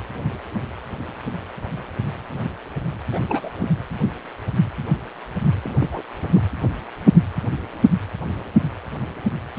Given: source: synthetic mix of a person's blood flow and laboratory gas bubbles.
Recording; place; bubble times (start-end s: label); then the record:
Doppler ultrasound of blood flow; precordium
3.12-3.20 s: bubbles
3.29-3.50 s: bubbles
3.58-3.70 s: bubbles
5.62-6.02 s: bubbles
6.33-6.42 s: bubbles
From the record:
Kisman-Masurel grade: 221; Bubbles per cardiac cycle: several, 3 to 8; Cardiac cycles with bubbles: 10 to 50%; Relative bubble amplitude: barely perceptible (0.100 to 0.250); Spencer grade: 2 (many but less than half of the cardiac periods contain bubble signals, singularly or in groups); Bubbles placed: anywhere in the cardiac cycle